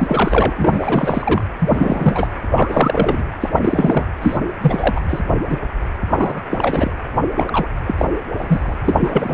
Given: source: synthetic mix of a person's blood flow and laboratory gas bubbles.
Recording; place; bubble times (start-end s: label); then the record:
Doppler ultrasound of blood flow; precordium
0.00-1.44 s: bubbles
1.60-2.30 s: bubbles
2.56-3.23 s: bubbles
3.40-3.50 s: bubbles
3.55-4.12 s: bubbles
4.21-4.37 s: bubbles
4.62-5.01 s: bubbles
5.08-5.20 s: bubbles
5.48-5.58 s: bubbles
6.07-6.43 s: bubbles
6.50-6.92 s: bubbles
7.36-7.68 s: bubbles
7.87-8.05 s: bubbles
8.37-8.75 s: bubbles
8.85-9.34 s: bubbles
From the record:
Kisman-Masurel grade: 343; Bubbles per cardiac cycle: rolling drumbeat, 9 or more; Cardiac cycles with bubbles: 100%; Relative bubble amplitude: loud (0.450 to 0.775); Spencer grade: 3 (all of the cardiac periods contain showers or single bubble signals, but not dominating or overriding the cardiac motion signals); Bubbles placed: anywhere in the cardiac cycle